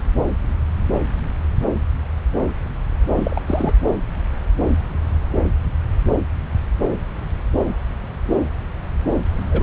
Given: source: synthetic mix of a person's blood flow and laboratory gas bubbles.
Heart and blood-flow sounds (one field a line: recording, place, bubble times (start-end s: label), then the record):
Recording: Doppler ultrasound of blood flow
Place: subclavian vein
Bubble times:
3.15-3.41 s: bubbles
3.48-3.72 s: bubbles
9.51-9.63 s: bubbles
From the record:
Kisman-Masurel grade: 222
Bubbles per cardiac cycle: several, 3 to 8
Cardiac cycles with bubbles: 10 to 50%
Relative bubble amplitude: moderate (0.250 to 0.450)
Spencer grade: 2 (many but less than half of the cardiac periods contain bubble signals, singularly or in groups)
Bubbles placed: anywhere in the cardiac cycle